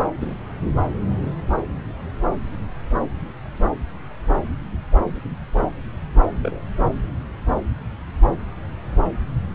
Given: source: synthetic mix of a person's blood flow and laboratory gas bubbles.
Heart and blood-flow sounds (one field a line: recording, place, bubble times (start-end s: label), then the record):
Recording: Doppler ultrasound of blood flow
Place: subclavian vein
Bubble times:
0.20-0.35 s: bubbles
6.42-6.62 s: bubbles
From the record:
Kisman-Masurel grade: 121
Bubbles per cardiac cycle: 1 to 2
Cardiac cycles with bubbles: 10 to 50%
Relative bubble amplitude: barely perceptible (0.100 to 0.250)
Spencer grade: 2 (many but less than half of the cardiac periods contain bubble signals, singularly or in groups)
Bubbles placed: anywhere in the cardiac cycle